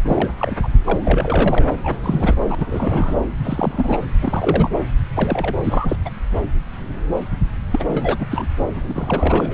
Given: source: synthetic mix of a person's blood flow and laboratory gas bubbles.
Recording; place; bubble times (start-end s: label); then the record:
Doppler ultrasound of blood flow; subclavian vein
0.04-0.32 s: bubbles
0.37-0.56 s: bubbles
0.62-0.69 s: bubbles
0.86-1.69 s: bubbles
1.84-1.99 s: bubbles
2.02-2.35 s: bubbles
2.49-3.26 s: bubbles
3.40-3.99 s: bubbles
4.21-4.70 s: bubbles
5.15-5.54 s: bubbles
5.63-5.96 s: bubbles
6.05-6.10 s: bubbles
7.71-7.85 s: bubbles
7.88-8.27 s: bubbles
8.30-8.47 s: bubbles
8.74-9.54 s: bubbles
From the record:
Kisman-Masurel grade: 332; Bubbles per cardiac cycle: rolling drumbeat, 9 or more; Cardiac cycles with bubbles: 50 to 99%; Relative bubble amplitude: moderate (0.250 to 0.450); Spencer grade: 3 (all of the cardiac periods contain showers or single bubble signals, but not dominating or overriding the cardiac motion signals); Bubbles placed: anywhere in the cardiac cycle